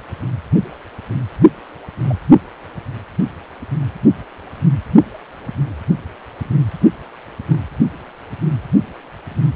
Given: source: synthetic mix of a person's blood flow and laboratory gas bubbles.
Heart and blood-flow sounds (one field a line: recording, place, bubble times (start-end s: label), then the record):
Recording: Doppler ultrasound of blood flow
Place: precordium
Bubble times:
2.04-2.15 s: bubbles
7.49-7.59 s: bubbles
From the record:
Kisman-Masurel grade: 121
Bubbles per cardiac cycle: 1 to 2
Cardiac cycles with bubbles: 10 to 50%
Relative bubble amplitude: barely perceptible (0.100 to 0.250)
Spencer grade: 2 (many but less than half of the cardiac periods contain bubble signals, singularly or in groups)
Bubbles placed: only in the low amplitude regions of the cardiac cycle